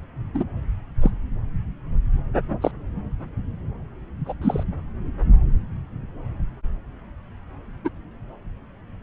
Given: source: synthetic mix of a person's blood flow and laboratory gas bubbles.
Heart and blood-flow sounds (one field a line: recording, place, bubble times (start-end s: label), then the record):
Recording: Doppler ultrasound of blood flow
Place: subclavian vein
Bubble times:
0.34-0.43 s: bubbles
1.01-1.11 s: bubbles
2.61-2.71 s: bubbles
4.25-4.33 s: bubbles
4.41-4.63 s: bubbles
7.84-7.89 s: bubbles
From the record:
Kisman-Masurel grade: 122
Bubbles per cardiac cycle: 1 to 2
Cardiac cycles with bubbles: 10 to 50%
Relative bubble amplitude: moderate (0.250 to 0.450)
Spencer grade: 2 (many but less than half of the cardiac periods contain bubble signals, singularly or in groups)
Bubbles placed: anywhere in the cardiac cycle